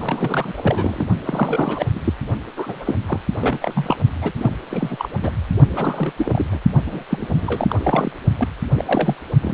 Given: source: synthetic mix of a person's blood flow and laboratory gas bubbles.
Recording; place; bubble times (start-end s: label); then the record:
Doppler ultrasound of blood flow; precordium
0.00-0.54 s: bubbles
0.57-1.07 s: bubbles
1.24-1.86 s: bubbles
1.95-1.99 s: bubbles
2.04-2.13 s: bubbles
2.56-2.98 s: bubbles
3.07-3.19 s: bubbles
3.40-3.57 s: bubbles
3.61-3.96 s: bubbles
4.22-4.32 s: bubbles
4.38-4.50 s: bubbles
4.70-5.10 s: bubbles
5.22-5.32 s: bubbles
5.76-6.12 s: bubbles
6.16-6.46 s: bubbles
6.52-6.60 s: bubbles
6.86-7.03 s: bubbles
7.10-7.76 s: bubbles
7.79-8.12 s: bubbles
8.38-8.49 s: bubbles
8.76-9.16 s: bubbles
9.41-9.54 s: bubbles
From the record:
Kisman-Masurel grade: 332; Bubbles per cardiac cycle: rolling drumbeat, 9 or more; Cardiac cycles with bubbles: 50 to 99%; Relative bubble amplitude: moderate (0.250 to 0.450); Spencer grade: 3 (all of the cardiac periods contain showers or single bubble signals, but not dominating or overriding the cardiac motion signals); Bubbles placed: only in the low amplitude regions of the cardiac cycle